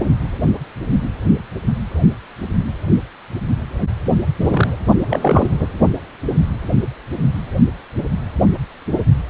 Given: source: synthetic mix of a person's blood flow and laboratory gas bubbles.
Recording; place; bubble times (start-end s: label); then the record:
Doppler ultrasound of blood flow; precordium
4.44-4.77 s: bubbles
5.09-5.50 s: bubbles
5.59-5.67 s: bubbles
From the record:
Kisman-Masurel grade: 222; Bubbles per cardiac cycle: several, 3 to 8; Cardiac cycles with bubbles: 10 to 50%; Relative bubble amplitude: moderate (0.250 to 0.450); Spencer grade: 2 (many but less than half of the cardiac periods contain bubble signals, singularly or in groups); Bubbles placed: only in the low amplitude regions of the cardiac cycle